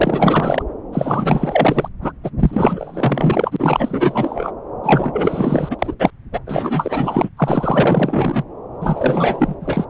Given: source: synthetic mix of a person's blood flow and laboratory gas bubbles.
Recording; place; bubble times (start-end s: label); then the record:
Doppler ultrasound of blood flow; subclavian vein
0.00-0.62 s: bubbles
0.93-1.89 s: bubbles
2.02-2.12 s: bubbles
2.23-2.30 s: bubbles
2.39-4.52 s: bubbles
4.83-5.95 s: bubbles
5.99-6.11 s: bubbles
6.32-6.40 s: bubbles
6.46-7.30 s: bubbles
7.37-8.43 s: bubbles
8.81-9.55 s: bubbles
9.60-9.86 s: bubbles
From the record:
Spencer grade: 4 (maximum detectable bubble signal sounding continuously throughout systole and diastole of every cardiac period, and overriding the amplitude of the normal cardiac signals); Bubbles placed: anywhere in the cardiac cycle